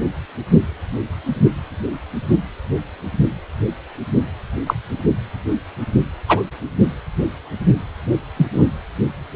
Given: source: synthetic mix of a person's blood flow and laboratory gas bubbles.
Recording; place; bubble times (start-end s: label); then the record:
Doppler ultrasound of blood flow; precordium
4.66-4.74 s: bubbles
6.28-6.43 s: bubbles
8.37-8.46 s: bubbles
8.53-8.63 s: bubbles
From the record:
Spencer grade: 2 (many but less than half of the cardiac periods contain bubble signals, singularly or in groups); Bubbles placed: anywhere in the cardiac cycle